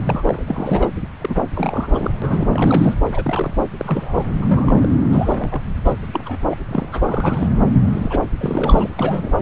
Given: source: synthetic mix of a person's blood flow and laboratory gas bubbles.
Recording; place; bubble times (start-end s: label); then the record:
Doppler ultrasound of blood flow; subclavian vein
0.05-0.43 s: bubbles
0.47-0.89 s: bubbles
1.21-1.34 s: bubbles
1.54-2.11 s: bubbles
2.22-2.94 s: bubbles
3.14-3.53 s: bubbles
3.77-4.31 s: bubbles
4.37-4.88 s: bubbles
5.12-5.62 s: bubbles
5.85-5.93 s: bubbles
6.12-6.43 s: bubbles
6.51-6.55 s: bubbles
6.69-6.87 s: bubbles
6.92-7.03 s: bubbles
7.05-7.48 s: bubbles
7.91-8.21 s: bubbles
8.38-8.90 s: bubbles
8.97-9.32 s: bubbles
From the record:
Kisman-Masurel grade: 242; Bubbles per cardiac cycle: several, 3 to 8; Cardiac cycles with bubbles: 100%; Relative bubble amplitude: moderate (0.250 to 0.450); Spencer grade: 3 (all of the cardiac periods contain showers or single bubble signals, but not dominating or overriding the cardiac motion signals); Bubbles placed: anywhere in the cardiac cycle